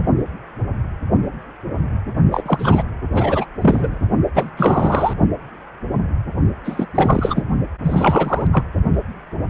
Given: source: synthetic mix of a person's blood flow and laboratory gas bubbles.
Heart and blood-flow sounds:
Doppler ultrasound of blood flow; precordium
2.31-2.83 s: bubbles
3.13-3.46 s: bubbles
3.61-3.98 s: bubbles
4.34-4.50 s: bubbles
4.57-5.13 s: bubbles
6.64-6.86 s: bubbles
6.95-7.42 s: bubbles
7.83-8.47 s: bubbles
8.52-8.63 s: bubbles
From the record:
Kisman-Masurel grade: 333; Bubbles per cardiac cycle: rolling drumbeat, 9 or more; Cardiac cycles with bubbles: 50 to 99%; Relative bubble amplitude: loud (0.450 to 0.775); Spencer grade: 3 (all of the cardiac periods contain showers or single bubble signals, but not dominating or overriding the cardiac motion signals); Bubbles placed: only in the low amplitude regions of the cardiac cycle

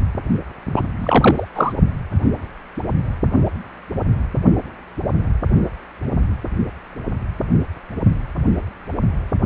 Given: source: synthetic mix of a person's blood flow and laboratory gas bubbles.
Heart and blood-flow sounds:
Doppler ultrasound of blood flow; precordium
0.76-0.85 s: bubbles
0.99-1.47 s: bubbles
1.55-1.73 s: bubbles
From the record:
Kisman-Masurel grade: 213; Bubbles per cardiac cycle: several, 3 to 8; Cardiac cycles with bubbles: 1 to 10%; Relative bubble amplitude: loud (0.450 to 0.775); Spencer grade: 1 (occasional bubble signal discernible with the cardiac motion signal, with majority of cardiac periods free of bubbles); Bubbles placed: only in the low amplitude regions of the cardiac cycle

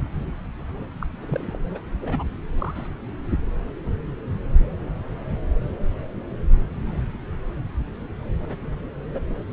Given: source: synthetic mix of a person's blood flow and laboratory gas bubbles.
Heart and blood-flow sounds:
Doppler ultrasound of blood flow; subclavian vein
0.11-0.31 s: bubbles
1.01-1.07 s: bubbles
1.21-1.57 s: bubbles
1.74-1.79 s: bubbles
2.01-2.23 s: bubbles
2.58-2.88 s: bubbles
6.86-7.01 s: bubbles
8.48-8.58 s: bubbles
9.13-9.21 s: bubbles
From the record:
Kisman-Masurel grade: 121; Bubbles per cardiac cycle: 1 to 2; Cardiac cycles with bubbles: 10 to 50%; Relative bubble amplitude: barely perceptible (0.100 to 0.250); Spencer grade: 2 (many but less than half of the cardiac periods contain bubble signals, singularly or in groups); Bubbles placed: anywhere in the cardiac cycle

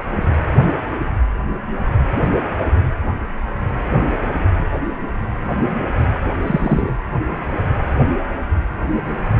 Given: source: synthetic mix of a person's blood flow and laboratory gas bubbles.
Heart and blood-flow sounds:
Doppler ultrasound of blood flow; precordium
6.42-6.92 s: bubbles
From the record:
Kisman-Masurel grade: 113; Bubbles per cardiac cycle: 1 to 2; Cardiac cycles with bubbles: 1 to 10%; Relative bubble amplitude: loud (0.450 to 0.775); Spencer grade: 1 (occasional bubble signal discernible with the cardiac motion signal, with majority of cardiac periods free of bubbles); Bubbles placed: anywhere in the cardiac cycle

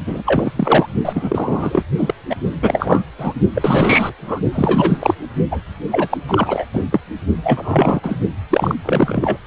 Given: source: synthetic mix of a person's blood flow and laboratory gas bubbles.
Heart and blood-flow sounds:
Doppler ultrasound of blood flow; precordium
0.07-0.23 s: bubbles
0.26-0.52 s: bubbles
0.56-0.86 s: bubbles
1.04-1.83 s: bubbles
1.98-2.15 s: bubbles
2.29-2.35 s: bubbles
2.62-3.04 s: bubbles
3.18-3.33 s: bubbles
3.54-4.12 s: bubbles
4.18-4.40 s: bubbles
4.53-5.15 s: bubbles
5.51-5.61 s: bubbles
5.91-6.08 s: bubbles
6.11-6.17 s: bubbles
6.28-6.65 s: bubbles
6.72-6.84 s: bubbles
6.91-7.00 s: bubbles
7.43-8.00 s: bubbles
8.03-8.17 s: bubbles
8.50-8.75 s: bubbles
8.83-9.37 s: bubbles
From the record:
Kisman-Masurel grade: 343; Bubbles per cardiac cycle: rolling drumbeat, 9 or more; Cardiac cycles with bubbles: 100%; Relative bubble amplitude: loud (0.450 to 0.775); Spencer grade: 3 (all of the cardiac periods contain showers or single bubble signals, but not dominating or overriding the cardiac motion signals); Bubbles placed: only in the low amplitude regions of the cardiac cycle

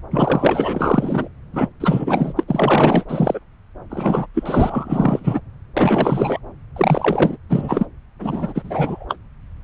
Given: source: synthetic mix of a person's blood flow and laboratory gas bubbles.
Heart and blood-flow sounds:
Doppler ultrasound of blood flow; subclavian vein
0.11-1.28 s: bubbles
1.52-1.68 s: bubbles
1.80-2.44 s: bubbles
2.48-3.04 s: bubbles
3.08-3.40 s: bubbles
3.90-4.27 s: bubbles
4.34-5.41 s: bubbles
5.77-6.39 s: bubbles
6.76-7.37 s: bubbles
7.49-7.86 s: bubbles
8.20-9.05 s: bubbles
9.08-9.17 s: bubbles
From the record:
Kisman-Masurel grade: 444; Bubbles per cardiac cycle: continuous sound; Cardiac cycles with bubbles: 100%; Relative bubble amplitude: maximal (0.775 to 0.999); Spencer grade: 4 (maximum detectable bubble signal sounding continuously throughout systole and diastole of every cardiac period, and overriding the amplitude of the normal cardiac signals); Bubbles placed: anywhere in the cardiac cycle

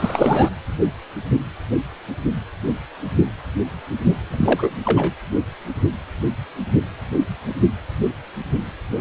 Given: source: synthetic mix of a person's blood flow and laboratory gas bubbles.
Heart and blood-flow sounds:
Doppler ultrasound of blood flow; precordium
0.00-0.49 s: bubbles
4.30-4.80 s: bubbles
4.85-5.13 s: bubbles
From the record:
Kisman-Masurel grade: 222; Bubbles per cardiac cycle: several, 3 to 8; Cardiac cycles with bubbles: 10 to 50%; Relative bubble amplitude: moderate (0.250 to 0.450); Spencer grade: 2 (many but less than half of the cardiac periods contain bubble signals, singularly or in groups); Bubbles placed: anywhere in the cardiac cycle

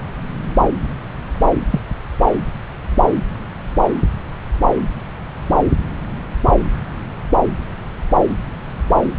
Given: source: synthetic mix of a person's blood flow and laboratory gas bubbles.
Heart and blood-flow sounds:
Doppler ultrasound of blood flow; subclavian vein
1.70-1.80 s: bubbles
From the record:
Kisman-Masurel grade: 123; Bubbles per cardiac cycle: 1 to 2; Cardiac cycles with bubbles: 10 to 50%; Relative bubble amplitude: loud (0.450 to 0.775); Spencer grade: 2 (many but less than half of the cardiac periods contain bubble signals, singularly or in groups); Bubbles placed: anywhere in the cardiac cycle

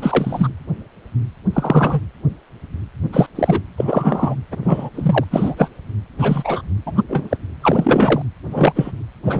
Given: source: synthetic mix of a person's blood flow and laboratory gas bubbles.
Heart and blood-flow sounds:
Doppler ultrasound of blood flow; precordium
0.00-0.48 s: bubbles
1.53-2.00 s: bubbles
3.12-3.27 s: bubbles
3.35-3.61 s: bubbles
3.77-4.36 s: bubbles
4.51-4.57 s: bubbles
4.63-4.90 s: bubbles
4.95-5.25 s: bubbles
5.31-5.69 s: bubbles
6.19-6.62 s: bubbles
6.86-7.02 s: bubbles
7.08-7.37 s: bubbles
7.62-8.22 s: bubbles
8.50-8.72 s: bubbles
8.75-8.91 s: bubbles
9.25-9.40 s: bubbles
From the record:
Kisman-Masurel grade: 233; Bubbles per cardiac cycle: several, 3 to 8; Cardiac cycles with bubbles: 50 to 99%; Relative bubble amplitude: loud (0.450 to 0.775); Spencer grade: 3 (all of the cardiac periods contain showers or single bubble signals, but not dominating or overriding the cardiac motion signals); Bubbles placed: anywhere in the cardiac cycle

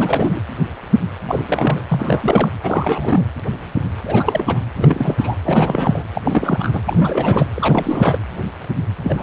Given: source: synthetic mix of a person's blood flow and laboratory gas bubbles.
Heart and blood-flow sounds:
Doppler ultrasound of blood flow; precordium
0.00-0.41 s: bubbles
1.28-1.82 s: bubbles
1.88-2.49 s: bubbles
2.62-3.25 s: bubbles
4.04-4.61 s: bubbles
4.75-5.35 s: bubbles
5.45-6.04 s: bubbles
6.15-6.81 s: bubbles
6.87-7.48 s: bubbles
7.54-8.19 s: bubbles
9.04-9.23 s: bubbles
From the record:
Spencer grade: 3 (all of the cardiac periods contain showers or single bubble signals, but not dominating or overriding the cardiac motion signals); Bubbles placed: anywhere in the cardiac cycle

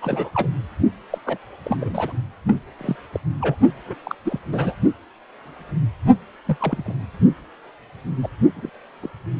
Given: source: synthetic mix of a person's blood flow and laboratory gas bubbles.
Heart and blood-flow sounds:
Doppler ultrasound of blood flow; precordium
0.01-0.31 s: bubbles
0.35-0.49 s: bubbles
1.10-1.18 s: bubbles
1.26-1.38 s: bubbles
1.63-2.12 s: bubbles
2.46-2.55 s: bubbles
2.77-2.96 s: bubbles
3.12-3.19 s: bubbles
3.40-3.55 s: bubbles
3.86-3.96 s: bubbles
4.04-4.15 s: bubbles
4.25-4.39 s: bubbles
4.52-4.73 s: bubbles
6.46-6.57 s: bubbles
6.60-6.94 s: bubbles
8.23-8.28 s: bubbles
8.56-8.70 s: bubbles
9.03-9.08 s: bubbles
From the record:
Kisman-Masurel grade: 232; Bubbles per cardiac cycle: several, 3 to 8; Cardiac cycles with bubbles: 50 to 99%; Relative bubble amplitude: moderate (0.250 to 0.450); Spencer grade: 3 (all of the cardiac periods contain showers or single bubble signals, but not dominating or overriding the cardiac motion signals); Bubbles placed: only in the low amplitude regions of the cardiac cycle

